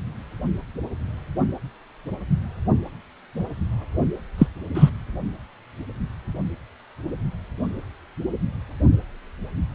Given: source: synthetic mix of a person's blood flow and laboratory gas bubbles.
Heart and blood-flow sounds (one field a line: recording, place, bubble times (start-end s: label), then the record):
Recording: Doppler ultrasound of blood flow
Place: precordium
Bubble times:
4.38-4.47 s: bubbles
4.75-4.90 s: bubbles
From the record:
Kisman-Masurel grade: 113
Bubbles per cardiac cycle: 1 to 2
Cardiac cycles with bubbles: 1 to 10%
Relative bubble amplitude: loud (0.450 to 0.775)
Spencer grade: 1 (occasional bubble signal discernible with the cardiac motion signal, with majority of cardiac periods free of bubbles)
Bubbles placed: only in the low amplitude regions of the cardiac cycle